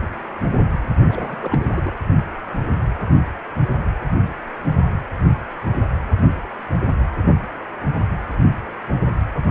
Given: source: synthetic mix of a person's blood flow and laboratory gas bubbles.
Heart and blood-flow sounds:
Doppler ultrasound of blood flow; precordium
1.02-1.98 s: bubbles
From the record:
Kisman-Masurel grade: 211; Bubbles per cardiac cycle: several, 3 to 8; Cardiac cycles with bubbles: 1 to 10%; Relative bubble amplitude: barely perceptible (0.100 to 0.250); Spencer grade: 1 (occasional bubble signal discernible with the cardiac motion signal, with majority of cardiac periods free of bubbles); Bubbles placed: anywhere in the cardiac cycle

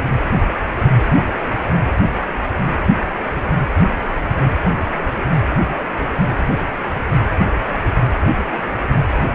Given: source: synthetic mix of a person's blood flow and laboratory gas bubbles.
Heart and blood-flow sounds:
Doppler ultrasound of blood flow; precordium
no bubbles
From the record:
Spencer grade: 0 (complete lack of bubble signals)

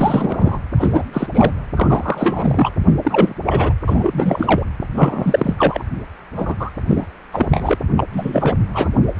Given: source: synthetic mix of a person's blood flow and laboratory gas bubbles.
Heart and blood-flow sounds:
Doppler ultrasound of blood flow; precordium
0.00-0.59 s: bubbles
0.77-1.28 s: bubbles
1.33-1.52 s: bubbles
1.75-2.71 s: bubbles
2.87-2.94 s: bubbles
3.03-3.34 s: bubbles
3.46-3.73 s: bubbles
3.88-4.64 s: bubbles
4.94-5.54 s: bubbles
5.58-5.83 s: bubbles
6.35-6.55 s: bubbles
6.59-6.70 s: bubbles
6.88-7.05 s: bubbles
7.32-7.75 s: bubbles
7.96-8.04 s: bubbles
8.12-8.58 s: bubbles
8.74-8.88 s: bubbles
9.16-9.19 s: bubbles
From the record:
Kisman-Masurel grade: 343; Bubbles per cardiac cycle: rolling drumbeat, 9 or more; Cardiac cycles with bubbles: 100%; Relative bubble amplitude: loud (0.450 to 0.775); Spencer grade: 3 (all of the cardiac periods contain showers or single bubble signals, but not dominating or overriding the cardiac motion signals); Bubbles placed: anywhere in the cardiac cycle

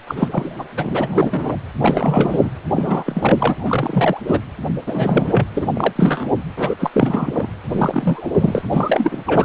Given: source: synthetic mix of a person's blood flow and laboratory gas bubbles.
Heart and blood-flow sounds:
Doppler ultrasound of blood flow; precordium
0.07-0.54 s: bubbles
0.58-0.65 s: bubbles
0.76-1.56 s: bubbles
1.81-2.50 s: bubbles
2.74-4.23 s: bubbles
4.27-4.40 s: bubbles
4.86-5.47 s: bubbles
5.54-5.68 s: bubbles
5.75-5.93 s: bubbles
5.96-6.29 s: bubbles
6.56-6.75 s: bubbles
6.79-6.90 s: bubbles
6.92-7.51 s: bubbles
7.68-8.62 s: bubbles
8.72-9.45 s: bubbles
From the record:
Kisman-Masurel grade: 343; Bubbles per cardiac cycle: rolling drumbeat, 9 or more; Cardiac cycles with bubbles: 100%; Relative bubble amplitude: loud (0.450 to 0.775); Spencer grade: 3 (all of the cardiac periods contain showers or single bubble signals, but not dominating or overriding the cardiac motion signals); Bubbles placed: anywhere in the cardiac cycle

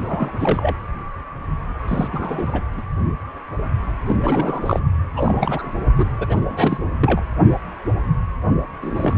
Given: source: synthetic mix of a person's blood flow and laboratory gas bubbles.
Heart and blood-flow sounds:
Doppler ultrasound of blood flow; precordium
0.00-0.32 s: bubbles
0.39-0.75 s: bubbles
1.88-2.08 s: bubbles
2.12-2.62 s: bubbles
2.77-2.81 s: bubbles
4.07-4.17 s: bubbles
4.21-4.79 s: bubbles
5.16-5.67 s: bubbles
5.98-6.06 s: bubbles
6.20-6.42 s: bubbles
6.49-6.84 s: bubbles
7.01-7.21 s: bubbles
8.81-9.18 s: bubbles
From the record:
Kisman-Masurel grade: 332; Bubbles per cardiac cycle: rolling drumbeat, 9 or more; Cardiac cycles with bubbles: 50 to 99%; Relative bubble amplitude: moderate (0.250 to 0.450); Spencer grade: 3 (all of the cardiac periods contain showers or single bubble signals, but not dominating or overriding the cardiac motion signals); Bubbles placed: anywhere in the cardiac cycle

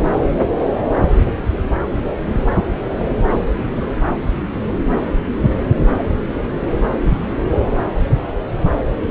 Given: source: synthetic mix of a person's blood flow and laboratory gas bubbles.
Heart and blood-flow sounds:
Doppler ultrasound of blood flow; subclavian vein
3.30-3.37 s: bubbles
3.59-3.90 s: bubbles
From the record:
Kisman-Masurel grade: 111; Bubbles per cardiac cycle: 1 to 2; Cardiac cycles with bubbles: 1 to 10%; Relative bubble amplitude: barely perceptible (0.100 to 0.250); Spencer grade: 1 (occasional bubble signal discernible with the cardiac motion signal, with majority of cardiac periods free of bubbles); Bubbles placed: anywhere in the cardiac cycle

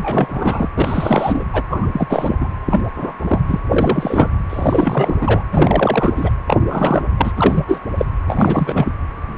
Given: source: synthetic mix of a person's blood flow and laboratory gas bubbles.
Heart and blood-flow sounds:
Doppler ultrasound of blood flow; precordium
0.00-0.69 s: bubbles
0.74-1.44 s: bubbles
1.52-1.62 s: bubbles
1.70-1.88 s: bubbles
1.93-2.48 s: bubbles
2.65-2.81 s: bubbles
2.96-3.13 s: bubbles
3.21-3.42 s: bubbles
3.48-3.60 s: bubbles
3.69-4.29 s: bubbles
4.49-5.14 s: bubbles
5.21-5.41 s: bubbles
5.52-6.30 s: bubbles
6.46-6.57 s: bubbles
6.68-7.03 s: bubbles
7.18-7.32 s: bubbles
7.36-7.65 s: bubbles
7.68-7.79 s: bubbles
7.97-8.05 s: bubbles
8.27-8.93 s: bubbles
From the record:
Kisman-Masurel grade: 343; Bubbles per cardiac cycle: rolling drumbeat, 9 or more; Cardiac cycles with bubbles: 100%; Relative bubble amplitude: loud (0.450 to 0.775); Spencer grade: 3 (all of the cardiac periods contain showers or single bubble signals, but not dominating or overriding the cardiac motion signals); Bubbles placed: anywhere in the cardiac cycle

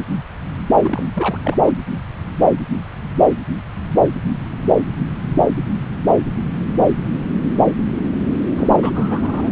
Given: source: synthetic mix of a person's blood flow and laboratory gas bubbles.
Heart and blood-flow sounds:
Doppler ultrasound of blood flow; subclavian vein
0.81-1.06 s: bubbles
1.13-1.40 s: bubbles
1.44-1.56 s: bubbles
1.66-1.71 s: bubbles
8.56-8.70 s: bubbles
8.80-8.91 s: bubbles
8.95-9.52 s: bubbles
From the record:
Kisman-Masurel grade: 222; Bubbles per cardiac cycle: several, 3 to 8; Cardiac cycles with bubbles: 10 to 50%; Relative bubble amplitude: moderate (0.250 to 0.450); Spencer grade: 2 (many but less than half of the cardiac periods contain bubble signals, singularly or in groups); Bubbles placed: anywhere in the cardiac cycle

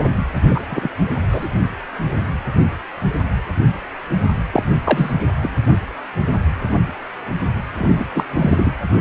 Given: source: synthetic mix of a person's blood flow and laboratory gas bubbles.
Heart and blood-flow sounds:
Doppler ultrasound of blood flow; precordium
0.51-0.61 s: bubbles
0.70-0.89 s: bubbles
1.30-1.48 s: bubbles
4.52-4.63 s: bubbles
4.85-5.12 s: bubbles
5.42-5.50 s: bubbles
7.76-8.05 s: bubbles
8.15-8.24 s: bubbles
8.31-8.74 s: bubbles
From the record:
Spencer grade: 2 (many but less than half of the cardiac periods contain bubble signals, singularly or in groups); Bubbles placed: anywhere in the cardiac cycle

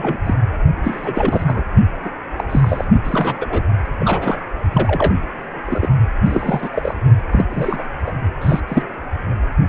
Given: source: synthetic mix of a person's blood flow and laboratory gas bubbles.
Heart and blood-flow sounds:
Doppler ultrasound of blood flow; precordium
0.00-0.22 s: bubbles
0.26-0.35 s: bubbles
0.84-1.44 s: bubbles
1.46-1.63 s: bubbles
2.02-2.10 s: bubbles
2.36-2.44 s: bubbles
2.50-2.88 s: bubbles
3.04-3.62 s: bubbles
4.00-4.40 s: bubbles
4.72-5.14 s: bubbles
5.65-5.88 s: bubbles
6.25-6.70 s: bubbles
6.72-6.95 s: bubbles
7.31-7.46 s: bubbles
7.49-7.83 s: bubbles
8.06-8.12 s: bubbles
8.41-8.60 s: bubbles
8.68-8.83 s: bubbles
From the record:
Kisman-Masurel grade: 242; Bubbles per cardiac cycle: several, 3 to 8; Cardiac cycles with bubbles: 100%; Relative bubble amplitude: moderate (0.250 to 0.450); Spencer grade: 3 (all of the cardiac periods contain showers or single bubble signals, but not dominating or overriding the cardiac motion signals); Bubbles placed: only in the low amplitude regions of the cardiac cycle

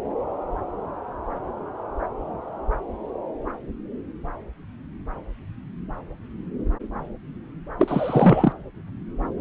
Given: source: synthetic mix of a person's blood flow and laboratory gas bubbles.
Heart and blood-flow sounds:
Doppler ultrasound of blood flow; subclavian vein
7.78-8.53 s: bubbles
From the record:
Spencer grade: 1 (occasional bubble signal discernible with the cardiac motion signal, with majority of cardiac periods free of bubbles); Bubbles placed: anywhere in the cardiac cycle

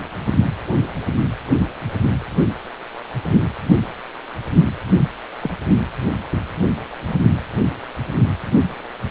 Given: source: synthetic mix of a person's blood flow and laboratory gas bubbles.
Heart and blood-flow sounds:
Doppler ultrasound of blood flow; precordium
5.40-5.50 s: bubbles
From the record:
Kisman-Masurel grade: 112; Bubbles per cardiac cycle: 1 to 2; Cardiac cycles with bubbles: 1 to 10%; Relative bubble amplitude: moderate (0.250 to 0.450); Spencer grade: 1 (occasional bubble signal discernible with the cardiac motion signal, with majority of cardiac periods free of bubbles); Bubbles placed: anywhere in the cardiac cycle

